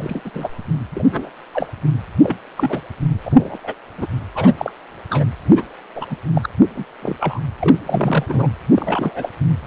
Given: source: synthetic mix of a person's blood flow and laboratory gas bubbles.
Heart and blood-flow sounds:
Doppler ultrasound of blood flow; precordium
0.00-0.21 s: bubbles
0.24-0.31 s: bubbles
0.34-0.48 s: bubbles
0.95-1.31 s: bubbles
1.54-1.68 s: bubbles
2.22-2.37 s: bubbles
2.56-2.82 s: bubbles
3.25-3.57 s: bubbles
3.64-3.73 s: bubbles
3.98-4.06 s: bubbles
4.34-4.54 s: bubbles
4.57-4.72 s: bubbles
5.10-5.26 s: bubbles
5.44-5.63 s: bubbles
5.95-6.06 s: bubbles
6.09-6.17 s: bubbles
6.34-6.46 s: bubbles
6.75-6.85 s: bubbles
7.02-7.16 s: bubbles
7.19-7.40 s: bubbles
7.59-7.77 s: bubbles
7.85-8.47 s: bubbles
8.71-9.30 s: bubbles
9.62-9.67 s: bubbles
From the record:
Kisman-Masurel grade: 242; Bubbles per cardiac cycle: several, 3 to 8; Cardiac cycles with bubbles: 100%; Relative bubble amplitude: moderate (0.250 to 0.450); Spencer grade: 3 (all of the cardiac periods contain showers or single bubble signals, but not dominating or overriding the cardiac motion signals); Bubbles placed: anywhere in the cardiac cycle

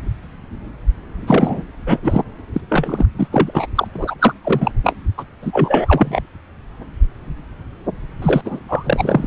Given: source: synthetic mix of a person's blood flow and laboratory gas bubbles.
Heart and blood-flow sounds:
Doppler ultrasound of blood flow; subclavian vein
1.27-1.62 s: bubbles
1.86-1.99 s: bubbles
2.02-2.21 s: bubbles
2.54-2.61 s: bubbles
2.69-3.06 s: bubbles
3.18-3.27 s: bubbles
3.31-3.51 s: bubbles
3.54-3.67 s: bubbles
3.75-3.88 s: bubbles
3.95-4.15 s: bubbles
4.19-4.33 s: bubbles
4.44-4.71 s: bubbles
4.83-4.96 s: bubbles
5.17-5.24 s: bubbles
5.42-6.21 s: bubbles
8.22-8.41 s: bubbles
8.44-8.62 s: bubbles
8.68-9.27 s: bubbles
From the record:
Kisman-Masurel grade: 333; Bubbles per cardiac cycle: rolling drumbeat, 9 or more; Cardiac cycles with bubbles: 50 to 99%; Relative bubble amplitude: loud (0.450 to 0.775); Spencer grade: 3 (all of the cardiac periods contain showers or single bubble signals, but not dominating or overriding the cardiac motion signals); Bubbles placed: anywhere in the cardiac cycle

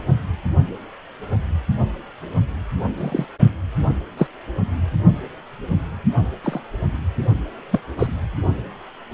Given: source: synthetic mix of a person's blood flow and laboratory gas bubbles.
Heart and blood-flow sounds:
Doppler ultrasound of blood flow; precordium
2.97-3.26 s: bubbles
4.17-4.27 s: bubbles
6.44-6.61 s: bubbles
7.71-7.80 s: bubbles
7.98-8.07 s: bubbles
From the record:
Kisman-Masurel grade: 122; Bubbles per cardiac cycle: 1 to 2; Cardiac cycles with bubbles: 10 to 50%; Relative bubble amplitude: moderate (0.250 to 0.450); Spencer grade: 2 (many but less than half of the cardiac periods contain bubble signals, singularly or in groups); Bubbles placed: only in the low amplitude regions of the cardiac cycle

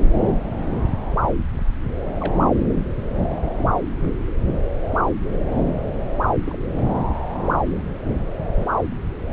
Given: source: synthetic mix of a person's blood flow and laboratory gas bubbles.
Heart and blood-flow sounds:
Doppler ultrasound of blood flow; subclavian vein
2.02-2.14 s: bubbles
2.21-2.35 s: bubbles
3.29-3.74 s: bubbles
6.42-6.57 s: bubbles
8.57-8.68 s: bubbles
From the record:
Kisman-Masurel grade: 121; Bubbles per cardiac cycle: 1 to 2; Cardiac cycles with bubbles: 10 to 50%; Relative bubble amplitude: barely perceptible (0.100 to 0.250); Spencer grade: 2 (many but less than half of the cardiac periods contain bubble signals, singularly or in groups); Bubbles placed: anywhere in the cardiac cycle

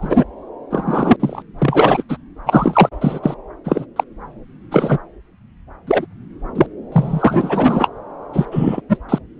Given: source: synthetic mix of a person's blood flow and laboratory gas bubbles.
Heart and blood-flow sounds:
Doppler ultrasound of blood flow; subclavian vein
0.01-0.24 s: bubbles
0.70-1.17 s: bubbles
1.19-1.42 s: bubbles
1.58-2.03 s: bubbles
2.09-2.17 s: bubbles
2.46-2.89 s: bubbles
3.01-3.20 s: bubbles
3.23-3.35 s: bubbles
3.65-3.85 s: bubbles
3.96-4.04 s: bubbles
4.71-4.98 s: bubbles
5.87-6.06 s: bubbles
6.55-6.67 s: bubbles
6.92-7.88 s: bubbles
8.33-8.46 s: bubbles
8.51-8.81 s: bubbles
8.89-8.97 s: bubbles
9.08-9.19 s: bubbles
From the record:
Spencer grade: 3 (all of the cardiac periods contain showers or single bubble signals, but not dominating or overriding the cardiac motion signals); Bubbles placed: anywhere in the cardiac cycle

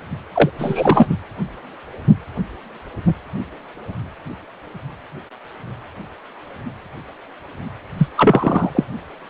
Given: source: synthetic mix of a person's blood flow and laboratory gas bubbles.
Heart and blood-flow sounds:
Doppler ultrasound of blood flow; precordium
0.34-0.50 s: bubbles
0.58-1.06 s: bubbles
7.97-8.08 s: bubbles
8.17-8.71 s: bubbles
8.75-8.85 s: bubbles
From the record:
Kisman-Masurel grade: 223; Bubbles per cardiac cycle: several, 3 to 8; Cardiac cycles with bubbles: 10 to 50%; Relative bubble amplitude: loud (0.450 to 0.775); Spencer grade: 2 (many but less than half of the cardiac periods contain bubble signals, singularly or in groups); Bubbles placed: anywhere in the cardiac cycle

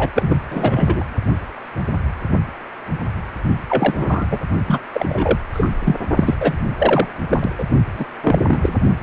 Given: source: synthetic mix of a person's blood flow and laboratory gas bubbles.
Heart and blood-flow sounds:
Doppler ultrasound of blood flow; precordium
0.00-0.10 s: bubbles
0.16-0.35 s: bubbles
0.51-1.04 s: bubbles
3.69-4.26 s: bubbles
4.31-4.39 s: bubbles
4.67-4.79 s: bubbles
4.92-5.39 s: bubbles
5.53-5.69 s: bubbles
5.83-5.96 s: bubbles
6.16-6.35 s: bubbles
6.40-6.54 s: bubbles
6.79-7.07 s: bubbles
7.29-7.55 s: bubbles
7.58-7.65 s: bubbles
7.94-8.05 s: bubbles
8.22-8.38 s: bubbles
8.47-8.74 s: bubbles
From the record:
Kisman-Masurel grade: 233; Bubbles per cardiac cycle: several, 3 to 8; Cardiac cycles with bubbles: 50 to 99%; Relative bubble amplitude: loud (0.450 to 0.775); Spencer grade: 3 (all of the cardiac periods contain showers or single bubble signals, but not dominating or overriding the cardiac motion signals); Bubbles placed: only in the low amplitude regions of the cardiac cycle

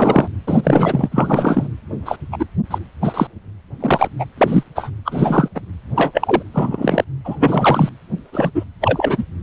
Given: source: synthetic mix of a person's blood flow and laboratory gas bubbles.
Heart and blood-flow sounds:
Doppler ultrasound of blood flow; precordium
0.00-0.28 s: bubbles
0.46-1.08 s: bubbles
1.11-1.67 s: bubbles
2.05-2.17 s: bubbles
2.31-2.45 s: bubbles
2.71-2.78 s: bubbles
3.02-3.27 s: bubbles
3.80-4.08 s: bubbles
4.19-4.25 s: bubbles
4.38-4.64 s: bubbles
4.75-4.90 s: bubbles
5.05-5.49 s: bubbles
5.54-5.61 s: bubbles
5.95-6.11 s: bubbles
6.14-6.43 s: bubbles
6.53-7.04 s: bubbles
7.25-7.36 s: bubbles
7.40-7.89 s: bubbles
8.32-8.50 s: bubbles
8.54-8.64 s: bubbles
8.80-9.24 s: bubbles
From the record:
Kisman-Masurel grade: 243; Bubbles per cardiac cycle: several, 3 to 8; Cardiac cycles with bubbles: 100%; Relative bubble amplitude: loud (0.450 to 0.775); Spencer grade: 3 (all of the cardiac periods contain showers or single bubble signals, but not dominating or overriding the cardiac motion signals); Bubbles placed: anywhere in the cardiac cycle

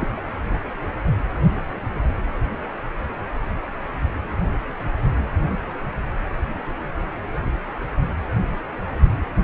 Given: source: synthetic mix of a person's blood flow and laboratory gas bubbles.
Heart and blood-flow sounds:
Doppler ultrasound of blood flow; precordium
0.00-0.10 s: bubbles
0.15-0.21 s: bubbles
From the record:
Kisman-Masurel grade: 222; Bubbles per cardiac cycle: several, 3 to 8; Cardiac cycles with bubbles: 10 to 50%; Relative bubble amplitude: moderate (0.250 to 0.450); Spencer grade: 2 (many but less than half of the cardiac periods contain bubble signals, singularly or in groups); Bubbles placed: anywhere in the cardiac cycle

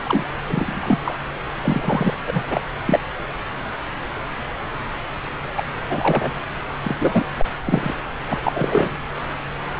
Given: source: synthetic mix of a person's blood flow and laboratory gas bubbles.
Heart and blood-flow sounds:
Doppler ultrasound of blood flow; subclavian vein
0.04-0.23 s: bubbles
0.47-0.98 s: bubbles
1.04-1.16 s: bubbles
1.62-2.14 s: bubbles
2.27-2.43 s: bubbles
2.48-2.61 s: bubbles
2.85-3.00 s: bubbles
5.57-5.63 s: bubbles
5.89-6.31 s: bubbles
6.83-6.96 s: bubbles
6.99-7.26 s: bubbles
7.38-7.45 s: bubbles
7.63-7.95 s: bubbles
8.28-8.38 s: bubbles
8.43-8.97 s: bubbles
From the record:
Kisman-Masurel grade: 233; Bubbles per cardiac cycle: several, 3 to 8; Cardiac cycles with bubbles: 50 to 99%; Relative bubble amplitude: loud (0.450 to 0.775); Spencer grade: 3 (all of the cardiac periods contain showers or single bubble signals, but not dominating or overriding the cardiac motion signals); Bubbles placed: anywhere in the cardiac cycle

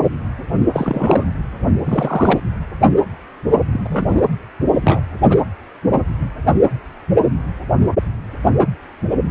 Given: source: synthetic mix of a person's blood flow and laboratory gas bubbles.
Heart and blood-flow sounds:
Doppler ultrasound of blood flow; precordium
0.73-1.26 s: bubbles
1.85-2.40 s: bubbles
3.72-3.80 s: bubbles
3.83-4.22 s: bubbles
4.84-5.03 s: bubbles
5.29-5.38 s: bubbles
From the record:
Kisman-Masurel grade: 222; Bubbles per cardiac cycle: several, 3 to 8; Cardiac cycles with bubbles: 10 to 50%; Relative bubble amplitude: moderate (0.250 to 0.450); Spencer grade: 2 (many but less than half of the cardiac periods contain bubble signals, singularly or in groups); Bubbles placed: anywhere in the cardiac cycle

